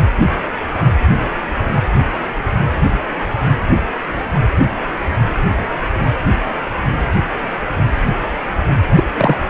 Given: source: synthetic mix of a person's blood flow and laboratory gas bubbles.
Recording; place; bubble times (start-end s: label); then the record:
Doppler ultrasound of blood flow; precordium
8.96-9.03 s: bubbles
9.17-9.38 s: bubbles
From the record:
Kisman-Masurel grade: 113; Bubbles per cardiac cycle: 1 to 2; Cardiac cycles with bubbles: 1 to 10%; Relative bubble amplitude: loud (0.450 to 0.775); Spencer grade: 1 (occasional bubble signal discernible with the cardiac motion signal, with majority of cardiac periods free of bubbles); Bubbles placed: anywhere in the cardiac cycle